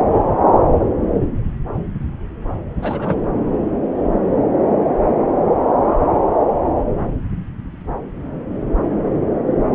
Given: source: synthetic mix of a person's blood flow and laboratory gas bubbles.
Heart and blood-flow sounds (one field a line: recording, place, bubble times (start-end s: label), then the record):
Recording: Doppler ultrasound of blood flow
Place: subclavian vein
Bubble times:
2.82-3.23 s: bubbles
From the record:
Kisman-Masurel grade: 212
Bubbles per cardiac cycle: several, 3 to 8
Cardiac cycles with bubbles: 1 to 10%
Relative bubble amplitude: moderate (0.250 to 0.450)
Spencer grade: 1 (occasional bubble signal discernible with the cardiac motion signal, with majority of cardiac periods free of bubbles)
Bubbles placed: anywhere in the cardiac cycle